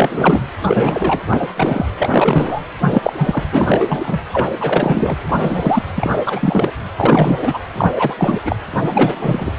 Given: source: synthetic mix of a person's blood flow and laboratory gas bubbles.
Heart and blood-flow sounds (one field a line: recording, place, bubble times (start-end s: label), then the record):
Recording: Doppler ultrasound of blood flow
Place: precordium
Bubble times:
0.00-0.40 s: bubbles
0.64-1.20 s: bubbles
1.29-1.47 s: bubbles
1.56-1.86 s: bubbles
1.98-2.62 s: bubbles
2.81-3.44 s: bubbles
3.52-4.19 s: bubbles
4.32-4.47 s: bubbles
4.60-5.17 s: bubbles
5.26-5.82 s: bubbles
5.94-6.11 s: bubbles
6.27-6.71 s: bubbles
6.96-7.58 s: bubbles
7.74-7.88 s: bubbles
7.96-8.39 s: bubbles
8.44-8.56 s: bubbles
8.71-9.51 s: bubbles
From the record:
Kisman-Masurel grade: 343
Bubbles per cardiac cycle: rolling drumbeat, 9 or more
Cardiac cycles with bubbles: 100%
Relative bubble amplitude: loud (0.450 to 0.775)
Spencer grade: 3 (all of the cardiac periods contain showers or single bubble signals, but not dominating or overriding the cardiac motion signals)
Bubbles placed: anywhere in the cardiac cycle